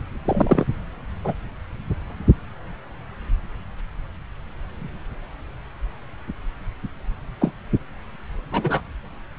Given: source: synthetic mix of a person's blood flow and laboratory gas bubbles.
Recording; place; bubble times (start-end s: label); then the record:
Doppler ultrasound of blood flow; subclavian vein
0.24-0.64 s: bubbles
1.24-1.33 s: bubbles
7.40-7.52 s: bubbles
8.52-8.81 s: bubbles
From the record:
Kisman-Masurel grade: 123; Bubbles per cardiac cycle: 1 to 2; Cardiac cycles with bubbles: 10 to 50%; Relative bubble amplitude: loud (0.450 to 0.775); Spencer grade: 2 (many but less than half of the cardiac periods contain bubble signals, singularly or in groups); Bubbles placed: anywhere in the cardiac cycle